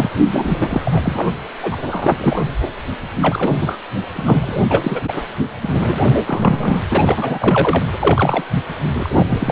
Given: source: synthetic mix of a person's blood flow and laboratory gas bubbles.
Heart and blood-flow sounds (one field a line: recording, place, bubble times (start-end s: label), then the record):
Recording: Doppler ultrasound of blood flow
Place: precordium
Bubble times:
0.00-0.10 s: bubbles
0.32-1.27 s: bubbles
1.62-1.76 s: bubbles
1.91-2.18 s: bubbles
2.20-2.43 s: bubbles
3.21-3.52 s: bubbles
3.61-3.79 s: bubbles
4.12-4.62 s: bubbles
4.71-5.02 s: bubbles
5.08-5.22 s: bubbles
5.62-6.10 s: bubbles
6.26-6.80 s: bubbles
6.88-7.83 s: bubbles
7.92-8.45 s: bubbles
8.50-8.62 s: bubbles
8.95-9.26 s: bubbles
9.29-9.51 s: bubbles
From the record:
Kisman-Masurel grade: 343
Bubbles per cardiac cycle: rolling drumbeat, 9 or more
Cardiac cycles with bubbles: 100%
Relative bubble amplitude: loud (0.450 to 0.775)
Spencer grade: 3 (all of the cardiac periods contain showers or single bubble signals, but not dominating or overriding the cardiac motion signals)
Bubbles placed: anywhere in the cardiac cycle